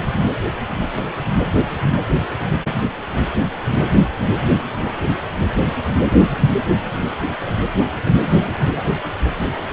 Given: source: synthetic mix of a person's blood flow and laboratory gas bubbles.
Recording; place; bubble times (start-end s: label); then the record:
Doppler ultrasound of blood flow; precordium
8.41-8.70 s: bubbles
From the record:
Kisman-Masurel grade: 111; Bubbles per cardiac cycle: 1 to 2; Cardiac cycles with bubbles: 1 to 10%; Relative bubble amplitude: barely perceptible (0.100 to 0.250); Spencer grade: 1 (occasional bubble signal discernible with the cardiac motion signal, with majority of cardiac periods free of bubbles); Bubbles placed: anywhere in the cardiac cycle